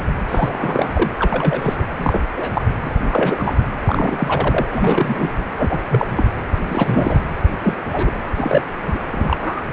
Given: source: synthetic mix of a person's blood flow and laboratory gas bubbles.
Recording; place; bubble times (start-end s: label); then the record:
Doppler ultrasound of blood flow; precordium
0.28-1.11 s: bubbles
1.19-1.86 s: bubbles
1.98-2.21 s: bubbles
2.35-2.66 s: bubbles
2.85-2.91 s: bubbles
3.10-3.58 s: bubbles
3.86-4.67 s: bubbles
4.71-5.29 s: bubbles
5.58-5.79 s: bubbles
5.88-6.07 s: bubbles
6.11-6.29 s: bubbles
6.69-7.21 s: bubbles
7.62-7.74 s: bubbles
7.87-8.12 s: bubbles
8.37-8.98 s: bubbles
9.11-9.37 s: bubbles
9.40-9.62 s: bubbles
From the record:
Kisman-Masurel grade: 232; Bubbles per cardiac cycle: several, 3 to 8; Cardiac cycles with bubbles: 50 to 99%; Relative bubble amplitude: moderate (0.250 to 0.450); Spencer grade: 3 (all of the cardiac periods contain showers or single bubble signals, but not dominating or overriding the cardiac motion signals); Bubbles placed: anywhere in the cardiac cycle